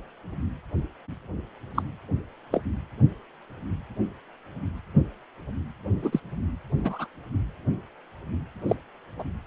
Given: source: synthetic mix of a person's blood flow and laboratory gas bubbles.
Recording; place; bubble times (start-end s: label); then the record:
Doppler ultrasound of blood flow; precordium
1.74-1.82 s: bubbles
2.52-2.61 s: bubbles
6.03-6.20 s: bubbles
6.83-7.07 s: bubbles
8.68-8.76 s: bubbles
9.19-9.23 s: bubbles
From the record:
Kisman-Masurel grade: 122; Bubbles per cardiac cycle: 1 to 2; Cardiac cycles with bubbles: 10 to 50%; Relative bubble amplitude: moderate (0.250 to 0.450); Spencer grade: 2 (many but less than half of the cardiac periods contain bubble signals, singularly or in groups); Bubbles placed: anywhere in the cardiac cycle